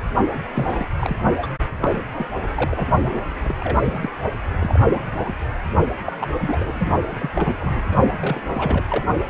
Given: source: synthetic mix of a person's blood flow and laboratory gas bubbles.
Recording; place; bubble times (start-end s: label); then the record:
Doppler ultrasound of blood flow; precordium
0.32-0.39 s: bubbles
0.54-0.86 s: bubbles
0.97-1.17 s: bubbles
1.42-1.47 s: bubbles
1.81-2.02 s: bubbles
2.13-2.26 s: bubbles
2.54-2.88 s: bubbles
3.02-3.21 s: bubbles
3.45-3.56 s: bubbles
3.60-4.10 s: bubbles
4.61-4.82 s: bubbles
4.86-5.03 s: bubbles
5.12-5.35 s: bubbles
6.06-6.16 s: bubbles
6.20-6.35 s: bubbles
6.41-6.87 s: bubbles
7.07-7.95 s: bubbles
8.21-8.84 s: bubbles
8.90-9.06 s: bubbles
From the record:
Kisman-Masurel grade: 242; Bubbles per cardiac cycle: several, 3 to 8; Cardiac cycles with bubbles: 100%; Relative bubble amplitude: moderate (0.250 to 0.450); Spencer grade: 3 (all of the cardiac periods contain showers or single bubble signals, but not dominating or overriding the cardiac motion signals); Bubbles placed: only in the low amplitude regions of the cardiac cycle